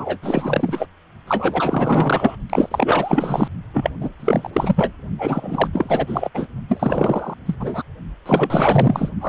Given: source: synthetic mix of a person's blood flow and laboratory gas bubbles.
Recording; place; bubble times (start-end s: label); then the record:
Doppler ultrasound of blood flow; precordium
0.00-0.18 s: bubbles
0.22-0.86 s: bubbles
1.27-2.37 s: bubbles
2.50-3.48 s: bubbles
3.73-3.94 s: bubbles
4.00-4.09 s: bubbles
4.19-4.93 s: bubbles
5.18-5.68 s: bubbles
5.72-6.29 s: bubbles
6.34-6.46 s: bubbles
6.68-7.34 s: bubbles
7.45-7.55 s: bubbles
7.59-7.83 s: bubbles
8.26-9.11 s: bubbles
9.21-9.29 s: bubbles
From the record:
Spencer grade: 4 (maximum detectable bubble signal sounding continuously throughout systole and diastole of every cardiac period, and overriding the amplitude of the normal cardiac signals); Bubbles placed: only in the low amplitude regions of the cardiac cycle